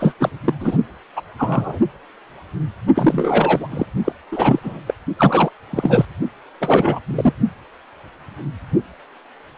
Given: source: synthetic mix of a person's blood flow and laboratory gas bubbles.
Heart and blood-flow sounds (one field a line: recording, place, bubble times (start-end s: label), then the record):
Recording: Doppler ultrasound of blood flow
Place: precordium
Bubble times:
0.00-0.14 s: bubbles
0.20-0.30 s: bubbles
0.45-0.54 s: bubbles
0.60-0.77 s: bubbles
1.16-1.21 s: bubbles
1.38-1.79 s: bubbles
2.95-3.67 s: bubbles
3.70-3.86 s: bubbles
4.05-4.12 s: bubbles
4.32-4.60 s: bubbles
4.62-4.80 s: bubbles
4.87-4.94 s: bubbles
5.19-5.50 s: bubbles
5.71-6.05 s: bubbles
6.60-7.01 s: bubbles
7.07-7.33 s: bubbles
From the record:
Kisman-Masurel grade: 333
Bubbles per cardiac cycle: rolling drumbeat, 9 or more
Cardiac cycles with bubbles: 50 to 99%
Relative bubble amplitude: loud (0.450 to 0.775)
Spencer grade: 3 (all of the cardiac periods contain showers or single bubble signals, but not dominating or overriding the cardiac motion signals)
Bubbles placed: only in the low amplitude regions of the cardiac cycle